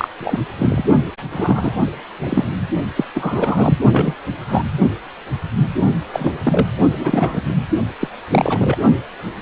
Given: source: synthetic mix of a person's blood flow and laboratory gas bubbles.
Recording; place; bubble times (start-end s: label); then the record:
Doppler ultrasound of blood flow; precordium
0.00-0.08 s: bubbles
0.20-0.40 s: bubbles
0.58-0.84 s: bubbles
1.30-1.71 s: bubbles
2.23-2.49 s: bubbles
2.96-3.05 s: bubbles
3.15-3.79 s: bubbles
3.92-4.14 s: bubbles
4.47-4.63 s: bubbles
6.12-6.38 s: bubbles
6.43-6.67 s: bubbles
6.96-7.42 s: bubbles
8.00-8.08 s: bubbles
8.29-8.77 s: bubbles
From the record:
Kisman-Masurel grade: 233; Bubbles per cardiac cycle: several, 3 to 8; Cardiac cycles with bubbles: 50 to 99%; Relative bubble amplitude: loud (0.450 to 0.775); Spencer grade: 3 (all of the cardiac periods contain showers or single bubble signals, but not dominating or overriding the cardiac motion signals); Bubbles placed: only in the low amplitude regions of the cardiac cycle